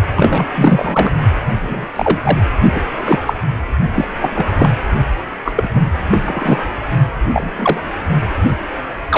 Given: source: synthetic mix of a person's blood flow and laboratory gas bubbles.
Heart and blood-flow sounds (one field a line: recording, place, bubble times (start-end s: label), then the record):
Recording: Doppler ultrasound of blood flow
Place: precordium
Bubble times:
0.15-0.47 s: bubbles
0.54-1.11 s: bubbles
1.60-1.88 s: bubbles
1.94-2.38 s: bubbles
2.75-2.80 s: bubbles
2.98-3.33 s: bubbles
3.95-4.08 s: bubbles
4.20-4.29 s: bubbles
4.33-4.46 s: bubbles
4.58-4.70 s: bubbles
5.43-5.68 s: bubbles
5.74-5.83 s: bubbles
6.11-6.21 s: bubbles
6.25-6.64 s: bubbles
7.33-7.81 s: bubbles
8.41-8.55 s: bubbles
9.09-9.18 s: bubbles
From the record:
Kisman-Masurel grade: 243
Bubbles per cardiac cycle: several, 3 to 8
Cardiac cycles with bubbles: 100%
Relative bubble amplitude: loud (0.450 to 0.775)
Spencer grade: 3 (all of the cardiac periods contain showers or single bubble signals, but not dominating or overriding the cardiac motion signals)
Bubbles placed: only in the low amplitude regions of the cardiac cycle